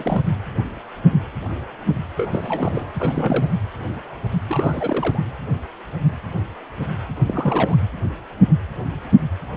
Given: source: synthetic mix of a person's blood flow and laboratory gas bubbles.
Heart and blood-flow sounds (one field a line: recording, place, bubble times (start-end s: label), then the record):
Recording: Doppler ultrasound of blood flow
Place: precordium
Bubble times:
0.00-0.22 s: bubbles
2.17-2.90 s: bubbles
2.94-3.51 s: bubbles
4.48-5.20 s: bubbles
7.28-7.77 s: bubbles
From the record:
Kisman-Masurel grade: 332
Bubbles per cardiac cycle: rolling drumbeat, 9 or more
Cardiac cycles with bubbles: 50 to 99%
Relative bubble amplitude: moderate (0.250 to 0.450)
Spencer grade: 3 (all of the cardiac periods contain showers or single bubble signals, but not dominating or overriding the cardiac motion signals)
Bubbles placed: anywhere in the cardiac cycle